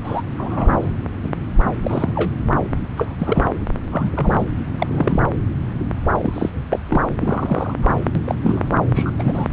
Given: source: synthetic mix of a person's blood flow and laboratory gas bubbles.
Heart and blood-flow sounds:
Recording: Doppler ultrasound of blood flow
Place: subclavian vein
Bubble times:
0.04-0.22 s: bubbles
0.37-0.67 s: bubbles
0.72-0.92 s: bubbles
1.22-1.29 s: bubbles
1.82-2.12 s: bubbles
2.15-2.31 s: bubbles
2.97-3.15 s: bubbles
3.19-3.49 s: bubbles
3.91-4.46 s: bubbles
4.79-5.20 s: bubbles
6.18-6.65 s: bubbles
6.71-6.79 s: bubbles
6.89-7.01 s: bubbles
7.08-7.74 s: bubbles
7.82-8.00 s: bubbles
8.15-8.19 s: bubbles
8.25-8.35 s: bubbles
8.43-8.70 s: bubbles
8.94-9.12 s: bubbles
9.19-9.46 s: bubbles
From the record:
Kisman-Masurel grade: 242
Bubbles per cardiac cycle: several, 3 to 8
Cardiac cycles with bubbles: 100%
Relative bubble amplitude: moderate (0.250 to 0.450)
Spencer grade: 3 (all of the cardiac periods contain showers or single bubble signals, but not dominating or overriding the cardiac motion signals)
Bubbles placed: anywhere in the cardiac cycle

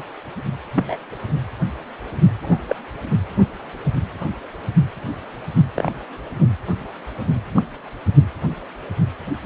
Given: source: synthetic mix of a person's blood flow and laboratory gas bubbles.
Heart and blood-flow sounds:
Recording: Doppler ultrasound of blood flow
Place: precordium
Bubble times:
0.75-0.97 s: bubbles
2.42-2.58 s: bubbles
2.69-2.76 s: bubbles
5.75-5.92 s: bubbles
7.54-7.62 s: bubbles
9.42-9.46 s: bubbles
From the record:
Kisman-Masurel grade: 122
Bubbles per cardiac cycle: 1 to 2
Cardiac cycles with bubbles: 10 to 50%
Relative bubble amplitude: moderate (0.250 to 0.450)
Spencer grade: 2 (many but less than half of the cardiac periods contain bubble signals, singularly or in groups)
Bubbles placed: anywhere in the cardiac cycle

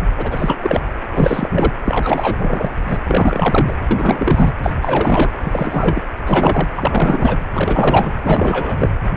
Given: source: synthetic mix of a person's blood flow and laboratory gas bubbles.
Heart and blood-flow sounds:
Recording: Doppler ultrasound of blood flow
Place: precordium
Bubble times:
0.18-0.80 s: bubbles
1.11-1.73 s: bubbles
1.84-2.71 s: bubbles
2.88-2.99 s: bubbles
3.05-3.74 s: bubbles
3.91-4.52 s: bubbles
4.63-4.75 s: bubbles
4.81-5.30 s: bubbles
5.42-6.03 s: bubbles
6.25-6.67 s: bubbles
6.75-7.38 s: bubbles
7.53-8.14 s: bubbles
8.23-8.89 s: bubbles
From the record:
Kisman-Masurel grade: 343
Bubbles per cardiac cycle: rolling drumbeat, 9 or more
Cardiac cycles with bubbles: 100%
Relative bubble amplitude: loud (0.450 to 0.775)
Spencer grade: 3 (all of the cardiac periods contain showers or single bubble signals, but not dominating or overriding the cardiac motion signals)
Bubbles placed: anywhere in the cardiac cycle

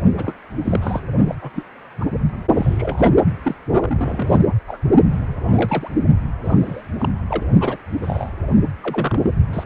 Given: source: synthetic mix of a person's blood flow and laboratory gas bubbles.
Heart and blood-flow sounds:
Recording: Doppler ultrasound of blood flow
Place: precordium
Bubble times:
0.16-0.36 s: bubbles
0.64-1.01 s: bubbles
1.29-1.35 s: bubbles
1.41-1.63 s: bubbles
2.00-2.05 s: bubbles
2.56-3.09 s: bubbles
3.13-3.23 s: bubbles
3.42-3.55 s: bubbles
3.81-4.38 s: bubbles
4.67-4.79 s: bubbles
5.12-5.88 s: bubbles
6.44-6.81 s: bubbles
6.99-7.08 s: bubbles
7.27-7.43 s: bubbles
7.60-7.77 s: bubbles
8.02-8.29 s: bubbles
8.83-9.30 s: bubbles
9.53-9.64 s: bubbles
From the record:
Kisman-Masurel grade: 242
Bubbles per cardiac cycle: several, 3 to 8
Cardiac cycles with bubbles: 100%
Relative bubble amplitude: moderate (0.250 to 0.450)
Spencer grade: 3 (all of the cardiac periods contain showers or single bubble signals, but not dominating or overriding the cardiac motion signals)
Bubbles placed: only in the low amplitude regions of the cardiac cycle

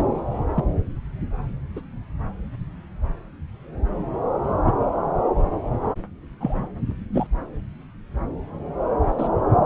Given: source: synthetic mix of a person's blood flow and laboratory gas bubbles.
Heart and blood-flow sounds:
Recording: Doppler ultrasound of blood flow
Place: subclavian vein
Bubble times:
0.00-0.07 s: bubbles
0.56-0.64 s: bubbles
1.76-1.81 s: bubbles
4.65-4.74 s: bubbles
6.40-6.68 s: bubbles
7.12-7.27 s: bubbles
9.18-9.29 s: bubbles
From the record:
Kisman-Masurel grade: 122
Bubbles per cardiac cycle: 1 to 2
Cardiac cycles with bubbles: 10 to 50%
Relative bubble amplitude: moderate (0.250 to 0.450)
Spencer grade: 2 (many but less than half of the cardiac periods contain bubble signals, singularly or in groups)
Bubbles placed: anywhere in the cardiac cycle

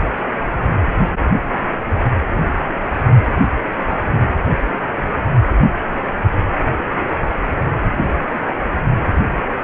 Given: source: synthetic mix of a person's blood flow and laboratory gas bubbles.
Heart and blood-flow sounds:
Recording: Doppler ultrasound of blood flow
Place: precordium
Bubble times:
1.76-1.99 s: bubbles
6.92-7.04 s: bubbles
8.35-8.39 s: bubbles
From the record:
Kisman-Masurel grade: 121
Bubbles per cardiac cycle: 1 to 2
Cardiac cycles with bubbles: 10 to 50%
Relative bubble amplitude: barely perceptible (0.100 to 0.250)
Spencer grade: 2 (many but less than half of the cardiac periods contain bubble signals, singularly or in groups)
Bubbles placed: anywhere in the cardiac cycle

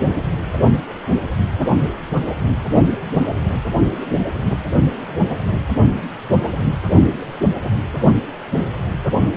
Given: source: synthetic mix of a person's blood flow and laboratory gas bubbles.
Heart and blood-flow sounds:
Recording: Doppler ultrasound of blood flow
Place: precordium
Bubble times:
5.94-6.04 s: bubbles
From the record:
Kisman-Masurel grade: 122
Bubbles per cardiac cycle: 1 to 2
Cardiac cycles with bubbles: 10 to 50%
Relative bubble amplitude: moderate (0.250 to 0.450)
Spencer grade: 2 (many but less than half of the cardiac periods contain bubble signals, singularly or in groups)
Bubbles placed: only in the low amplitude regions of the cardiac cycle

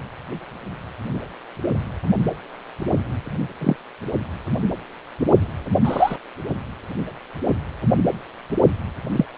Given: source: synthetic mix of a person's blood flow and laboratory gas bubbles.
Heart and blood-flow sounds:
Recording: Doppler ultrasound of blood flow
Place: precordium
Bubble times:
3.61-3.76 s: bubbles
5.84-6.16 s: bubbles
9.12-9.25 s: bubbles
From the record:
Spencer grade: 2 (many but less than half of the cardiac periods contain bubble signals, singularly or in groups)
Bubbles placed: anywhere in the cardiac cycle

